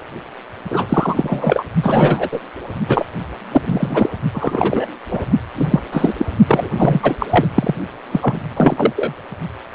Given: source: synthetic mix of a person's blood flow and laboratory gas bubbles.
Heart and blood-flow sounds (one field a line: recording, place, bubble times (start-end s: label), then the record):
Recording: Doppler ultrasound of blood flow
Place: precordium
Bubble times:
0.70-0.86 s: bubbles
0.89-1.63 s: bubbles
1.82-2.29 s: bubbles
2.31-2.40 s: bubbles
2.88-3.06 s: bubbles
3.52-4.10 s: bubbles
4.34-4.89 s: bubbles
5.11-5.25 s: bubbles
5.57-5.67 s: bubbles
5.70-5.80 s: bubbles
5.92-6.16 s: bubbles
6.18-6.26 s: bubbles
6.48-6.69 s: bubbles
6.77-7.16 s: bubbles
7.19-7.26 s: bubbles
7.31-7.46 s: bubbles
7.55-7.75 s: bubbles
8.11-8.39 s: bubbles
8.56-8.93 s: bubbles
8.96-9.13 s: bubbles
9.72-9.75 s: bubbles
From the record:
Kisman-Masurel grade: 243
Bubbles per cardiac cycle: several, 3 to 8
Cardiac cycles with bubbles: 100%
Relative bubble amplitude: loud (0.450 to 0.775)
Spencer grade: 3 (all of the cardiac periods contain showers or single bubble signals, but not dominating or overriding the cardiac motion signals)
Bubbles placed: only in the low amplitude regions of the cardiac cycle